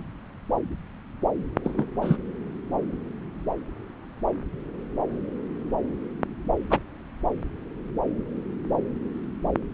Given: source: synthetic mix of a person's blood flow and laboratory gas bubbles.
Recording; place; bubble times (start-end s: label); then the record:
Doppler ultrasound of blood flow; subclavian vein
1.64-1.85 s: bubbles
2.01-2.16 s: bubbles
6.70-6.79 s: bubbles
From the record:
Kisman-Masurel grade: 112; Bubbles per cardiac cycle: 1 to 2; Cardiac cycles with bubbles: 1 to 10%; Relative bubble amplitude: moderate (0.250 to 0.450); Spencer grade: 1 (occasional bubble signal discernible with the cardiac motion signal, with majority of cardiac periods free of bubbles); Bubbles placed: anywhere in the cardiac cycle